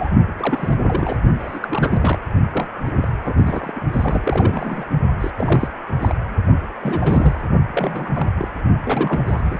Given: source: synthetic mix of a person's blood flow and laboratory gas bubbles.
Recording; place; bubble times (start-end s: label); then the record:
Doppler ultrasound of blood flow; precordium
0.00-0.10 s: bubbles
0.37-0.76 s: bubbles
0.85-1.17 s: bubbles
1.33-1.59 s: bubbles
1.62-2.18 s: bubbles
2.52-2.67 s: bubbles
2.86-2.90 s: bubbles
2.95-3.08 s: bubbles
3.25-3.80 s: bubbles
3.93-4.85 s: bubbles
5.20-5.31 s: bubbles
5.37-5.68 s: bubbles
6.01-6.15 s: bubbles
6.83-7.48 s: bubbles
7.72-8.09 s: bubbles
8.13-8.28 s: bubbles
8.38-8.48 s: bubbles
8.83-9.22 s: bubbles
9.25-9.59 s: bubbles
From the record:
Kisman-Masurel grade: 342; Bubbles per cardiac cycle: rolling drumbeat, 9 or more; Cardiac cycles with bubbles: 100%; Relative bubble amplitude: moderate (0.250 to 0.450); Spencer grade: 3 (all of the cardiac periods contain showers or single bubble signals, but not dominating or overriding the cardiac motion signals); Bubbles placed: only in the low amplitude regions of the cardiac cycle